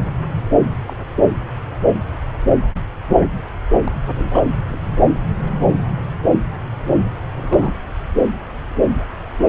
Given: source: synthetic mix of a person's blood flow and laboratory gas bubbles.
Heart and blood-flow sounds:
Doppler ultrasound of blood flow; subclavian vein
0.87-0.96 s: bubbles
3.84-3.91 s: bubbles
4.07-4.42 s: bubbles
4.72-4.79 s: bubbles
7.37-7.76 s: bubbles
9.46-9.49 s: bubbles
From the record:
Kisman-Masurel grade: 121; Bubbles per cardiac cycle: 1 to 2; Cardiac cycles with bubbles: 10 to 50%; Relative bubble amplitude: barely perceptible (0.100 to 0.250); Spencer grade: 2 (many but less than half of the cardiac periods contain bubble signals, singularly or in groups); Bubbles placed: anywhere in the cardiac cycle

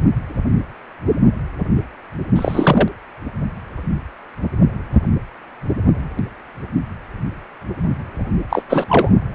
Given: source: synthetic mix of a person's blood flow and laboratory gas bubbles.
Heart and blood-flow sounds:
Doppler ultrasound of blood flow; precordium
2.35-2.88 s: bubbles
8.49-8.62 s: bubbles
8.69-8.86 s: bubbles
8.88-9.11 s: bubbles
From the record:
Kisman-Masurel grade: 213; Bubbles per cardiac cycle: several, 3 to 8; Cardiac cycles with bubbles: 1 to 10%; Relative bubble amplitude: loud (0.450 to 0.775); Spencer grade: 1 (occasional bubble signal discernible with the cardiac motion signal, with majority of cardiac periods free of bubbles); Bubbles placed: anywhere in the cardiac cycle

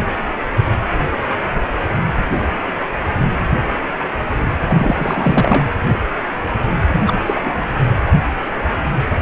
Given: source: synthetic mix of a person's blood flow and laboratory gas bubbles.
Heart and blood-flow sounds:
Doppler ultrasound of blood flow; precordium
4.69-5.70 s: bubbles
6.92-7.21 s: bubbles
7.26-7.41 s: bubbles
7.45-7.52 s: bubbles
7.56-7.65 s: bubbles
From the record:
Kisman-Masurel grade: 222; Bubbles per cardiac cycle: several, 3 to 8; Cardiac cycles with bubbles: 10 to 50%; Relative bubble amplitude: moderate (0.250 to 0.450); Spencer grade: 2 (many but less than half of the cardiac periods contain bubble signals, singularly or in groups); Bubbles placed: anywhere in the cardiac cycle

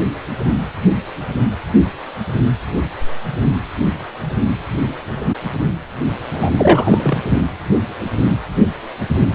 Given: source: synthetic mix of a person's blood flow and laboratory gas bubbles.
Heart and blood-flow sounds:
Doppler ultrasound of blood flow; precordium
6.33-6.51 s: bubbles
6.56-7.22 s: bubbles
From the record:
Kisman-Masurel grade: 213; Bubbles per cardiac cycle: several, 3 to 8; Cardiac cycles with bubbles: 1 to 10%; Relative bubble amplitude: loud (0.450 to 0.775); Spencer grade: 1 (occasional bubble signal discernible with the cardiac motion signal, with majority of cardiac periods free of bubbles); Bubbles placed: anywhere in the cardiac cycle

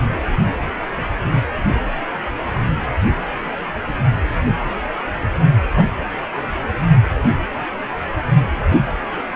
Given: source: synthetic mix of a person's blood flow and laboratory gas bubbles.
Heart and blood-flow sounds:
Doppler ultrasound of blood flow; precordium
5.76-5.85 s: bubbles
From the record:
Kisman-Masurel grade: 113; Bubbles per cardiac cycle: 1 to 2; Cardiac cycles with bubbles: 1 to 10%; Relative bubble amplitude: loud (0.450 to 0.775); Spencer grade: 1 (occasional bubble signal discernible with the cardiac motion signal, with majority of cardiac periods free of bubbles); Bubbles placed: anywhere in the cardiac cycle

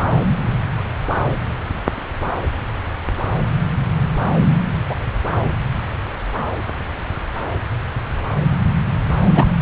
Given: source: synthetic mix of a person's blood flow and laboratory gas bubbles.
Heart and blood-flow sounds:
Doppler ultrasound of blood flow; subclavian vein
4.88-4.95 s: bubbles
9.34-9.56 s: bubbles
From the record:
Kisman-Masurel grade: 123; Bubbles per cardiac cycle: 1 to 2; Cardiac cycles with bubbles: 10 to 50%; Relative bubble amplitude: loud (0.450 to 0.775); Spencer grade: 2 (many but less than half of the cardiac periods contain bubble signals, singularly or in groups); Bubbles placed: anywhere in the cardiac cycle

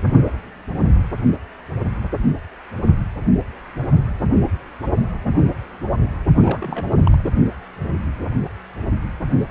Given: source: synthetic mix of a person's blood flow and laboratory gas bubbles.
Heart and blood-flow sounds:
Doppler ultrasound of blood flow; precordium
6.37-6.86 s: bubbles
7.04-7.31 s: bubbles
From the record:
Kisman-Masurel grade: 211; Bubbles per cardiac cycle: several, 3 to 8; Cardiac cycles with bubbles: 1 to 10%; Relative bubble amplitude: barely perceptible (0.100 to 0.250); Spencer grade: 1 (occasional bubble signal discernible with the cardiac motion signal, with majority of cardiac periods free of bubbles); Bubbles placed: only in the low amplitude regions of the cardiac cycle

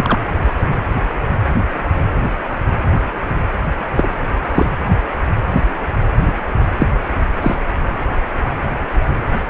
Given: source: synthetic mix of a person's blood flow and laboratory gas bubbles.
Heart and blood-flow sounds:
Doppler ultrasound of blood flow; precordium
0.00-0.19 s: bubbles
3.97-4.12 s: bubbles
4.54-4.67 s: bubbles
6.17-6.33 s: bubbles
6.78-6.87 s: bubbles
7.41-7.55 s: bubbles
From the record:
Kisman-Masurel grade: 123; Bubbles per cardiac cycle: 1 to 2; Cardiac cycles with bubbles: 10 to 50%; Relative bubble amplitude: loud (0.450 to 0.775); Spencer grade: 2 (many but less than half of the cardiac periods contain bubble signals, singularly or in groups); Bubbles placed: anywhere in the cardiac cycle

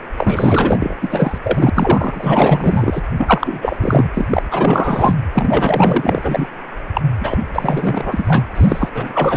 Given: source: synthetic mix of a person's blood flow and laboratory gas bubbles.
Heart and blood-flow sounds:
Doppler ultrasound of blood flow; precordium
0.17-0.94 s: bubbles
1.01-1.38 s: bubbles
1.44-1.70 s: bubbles
1.74-3.01 s: bubbles
3.17-3.77 s: bubbles
3.80-4.11 s: bubbles
4.14-4.25 s: bubbles
4.29-4.43 s: bubbles
4.51-5.16 s: bubbles
5.33-6.47 s: bubbles
6.94-7.02 s: bubbles
7.21-7.38 s: bubbles
7.53-8.43 s: bubbles
8.55-8.89 s: bubbles
8.94-9.37 s: bubbles
From the record:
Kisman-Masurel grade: 444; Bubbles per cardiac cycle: continuous sound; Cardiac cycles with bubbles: 100%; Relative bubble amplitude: maximal (0.775 to 0.999); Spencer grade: 4 (maximum detectable bubble signal sounding continuously throughout systole and diastole of every cardiac period, and overriding the amplitude of the normal cardiac signals); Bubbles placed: anywhere in the cardiac cycle

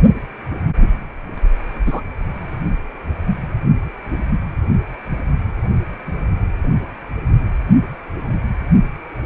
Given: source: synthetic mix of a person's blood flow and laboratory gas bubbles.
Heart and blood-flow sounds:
Doppler ultrasound of blood flow; precordium
1.86-2.01 s: bubbles
From the record:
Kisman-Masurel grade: 123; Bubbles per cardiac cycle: 1 to 2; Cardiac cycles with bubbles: 10 to 50%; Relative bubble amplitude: loud (0.450 to 0.775); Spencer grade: 2 (many but less than half of the cardiac periods contain bubble signals, singularly or in groups); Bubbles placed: only in the low amplitude regions of the cardiac cycle

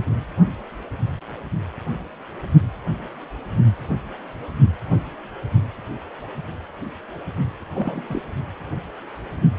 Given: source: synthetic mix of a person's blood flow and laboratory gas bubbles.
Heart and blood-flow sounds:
Doppler ultrasound of blood flow; precordium
7.75-8.22 s: bubbles
From the record:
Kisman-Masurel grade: 211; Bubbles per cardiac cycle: several, 3 to 8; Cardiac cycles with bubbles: 1 to 10%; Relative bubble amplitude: barely perceptible (0.100 to 0.250); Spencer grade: 1 (occasional bubble signal discernible with the cardiac motion signal, with majority of cardiac periods free of bubbles); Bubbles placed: only in the low amplitude regions of the cardiac cycle

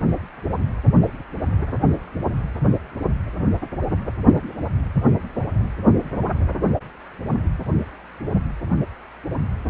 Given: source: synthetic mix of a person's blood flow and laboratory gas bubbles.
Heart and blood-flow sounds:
Doppler ultrasound of blood flow; precordium
9.65-9.70 s: bubbles
From the record:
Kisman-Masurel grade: 211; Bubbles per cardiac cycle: several, 3 to 8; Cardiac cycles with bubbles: 1 to 10%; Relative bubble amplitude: barely perceptible (0.100 to 0.250); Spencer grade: 1 (occasional bubble signal discernible with the cardiac motion signal, with majority of cardiac periods free of bubbles); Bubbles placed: anywhere in the cardiac cycle

